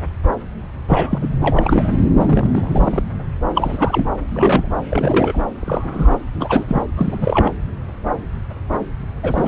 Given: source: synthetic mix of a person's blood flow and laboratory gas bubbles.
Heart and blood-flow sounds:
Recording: Doppler ultrasound of blood flow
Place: subclavian vein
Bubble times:
0.88-1.19 s: bubbles
1.21-1.28 s: bubbles
1.41-1.90 s: bubbles
2.19-3.03 s: bubbles
3.54-4.07 s: bubbles
4.29-4.84 s: bubbles
4.91-5.42 s: bubbles
5.62-6.19 s: bubbles
6.40-6.82 s: bubbles
6.96-7.51 s: bubbles
9.22-9.48 s: bubbles
From the record:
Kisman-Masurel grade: 233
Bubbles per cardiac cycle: several, 3 to 8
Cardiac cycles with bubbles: 50 to 99%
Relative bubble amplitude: loud (0.450 to 0.775)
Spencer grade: 3 (all of the cardiac periods contain showers or single bubble signals, but not dominating or overriding the cardiac motion signals)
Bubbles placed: anywhere in the cardiac cycle

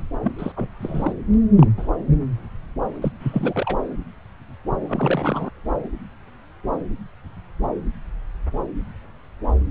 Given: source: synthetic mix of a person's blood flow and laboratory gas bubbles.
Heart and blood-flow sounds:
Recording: Doppler ultrasound of blood flow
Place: subclavian vein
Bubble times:
0.23-0.33 s: bubbles
0.39-0.52 s: bubbles
0.56-0.68 s: bubbles
0.81-1.14 s: bubbles
1.33-1.36 s: bubbles
1.57-1.67 s: bubbles
1.77-1.88 s: bubbles
3.02-3.12 s: bubbles
3.20-3.77 s: bubbles
4.88-5.50 s: bubbles
From the record:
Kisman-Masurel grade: 222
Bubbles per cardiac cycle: several, 3 to 8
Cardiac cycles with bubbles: 10 to 50%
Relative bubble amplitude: moderate (0.250 to 0.450)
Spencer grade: 2 (many but less than half of the cardiac periods contain bubble signals, singularly or in groups)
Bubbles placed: anywhere in the cardiac cycle

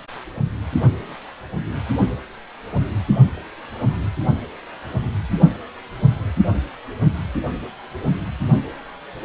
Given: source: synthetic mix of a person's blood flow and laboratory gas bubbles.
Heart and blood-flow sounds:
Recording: Doppler ultrasound of blood flow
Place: precordium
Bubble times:
no bubbles
From the record:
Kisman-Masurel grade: 000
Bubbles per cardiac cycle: 0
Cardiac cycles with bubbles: 0%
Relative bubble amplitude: no bubbles discernible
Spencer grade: 0 (complete lack of bubble signals)

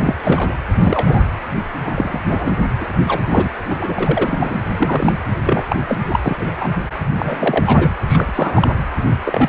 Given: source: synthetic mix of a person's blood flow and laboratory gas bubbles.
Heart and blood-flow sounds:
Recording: Doppler ultrasound of blood flow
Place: precordium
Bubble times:
0.00-0.15 s: bubbles
0.23-0.57 s: bubbles
0.73-1.23 s: bubbles
1.80-2.21 s: bubbles
2.29-2.57 s: bubbles
2.79-2.96 s: bubbles
3.07-3.21 s: bubbles
3.29-3.50 s: bubbles
3.69-4.60 s: bubbles
4.75-5.14 s: bubbles
5.45-5.63 s: bubbles
5.69-5.76 s: bubbles
5.88-5.97 s: bubbles
6.08-6.20 s: bubbles
6.23-6.78 s: bubbles
7.17-7.92 s: bubbles
8.07-8.68 s: bubbles
9.24-9.49 s: bubbles
From the record:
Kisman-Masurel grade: 243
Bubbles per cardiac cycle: several, 3 to 8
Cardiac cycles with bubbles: 100%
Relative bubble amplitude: loud (0.450 to 0.775)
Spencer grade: 3 (all of the cardiac periods contain showers or single bubble signals, but not dominating or overriding the cardiac motion signals)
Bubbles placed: anywhere in the cardiac cycle

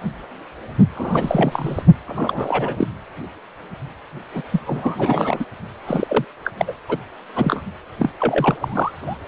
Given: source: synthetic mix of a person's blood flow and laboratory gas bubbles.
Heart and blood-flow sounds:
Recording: Doppler ultrasound of blood flow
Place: precordium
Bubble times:
0.95-1.82 s: bubbles
2.07-2.88 s: bubbles
4.33-4.43 s: bubbles
4.52-4.60 s: bubbles
4.66-5.45 s: bubbles
5.86-6.25 s: bubbles
6.44-6.51 s: bubbles
6.57-6.74 s: bubbles
6.89-6.97 s: bubbles
7.35-7.62 s: bubbles
7.99-8.09 s: bubbles
8.20-8.54 s: bubbles
8.62-9.17 s: bubbles
From the record:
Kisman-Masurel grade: 332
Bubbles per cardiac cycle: rolling drumbeat, 9 or more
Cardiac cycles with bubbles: 50 to 99%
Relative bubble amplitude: moderate (0.250 to 0.450)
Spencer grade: 3 (all of the cardiac periods contain showers or single bubble signals, but not dominating or overriding the cardiac motion signals)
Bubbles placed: anywhere in the cardiac cycle

